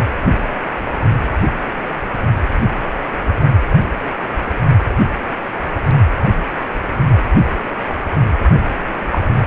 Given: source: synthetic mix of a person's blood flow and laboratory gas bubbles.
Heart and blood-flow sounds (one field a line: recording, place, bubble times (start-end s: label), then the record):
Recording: Doppler ultrasound of blood flow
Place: precordium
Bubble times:
9.12-9.18 s: bubbles
From the record:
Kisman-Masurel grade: 113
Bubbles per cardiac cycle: 1 to 2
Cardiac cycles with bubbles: 1 to 10%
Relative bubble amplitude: loud (0.450 to 0.775)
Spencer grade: 1 (occasional bubble signal discernible with the cardiac motion signal, with majority of cardiac periods free of bubbles)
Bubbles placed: only in the low amplitude regions of the cardiac cycle